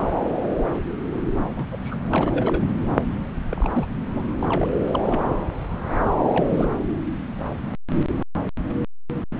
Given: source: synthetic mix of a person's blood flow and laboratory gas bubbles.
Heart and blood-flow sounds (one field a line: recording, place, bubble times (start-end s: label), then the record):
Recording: Doppler ultrasound of blood flow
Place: subclavian vein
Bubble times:
0.00-0.02 s: bubbles
1.53-1.65 s: bubbles
1.72-1.77 s: bubbles
1.84-1.96 s: bubbles
2.10-2.69 s: bubbles
3.52-3.70 s: bubbles
3.73-3.86 s: bubbles
4.15-4.23 s: bubbles
4.40-4.68 s: bubbles
4.91-5.00 s: bubbles
5.05-5.21 s: bubbles
6.32-6.69 s: bubbles
From the record:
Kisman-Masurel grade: 221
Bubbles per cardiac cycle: several, 3 to 8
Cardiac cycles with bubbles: 10 to 50%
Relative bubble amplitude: barely perceptible (0.100 to 0.250)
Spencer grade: 2 (many but less than half of the cardiac periods contain bubble signals, singularly or in groups)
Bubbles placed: anywhere in the cardiac cycle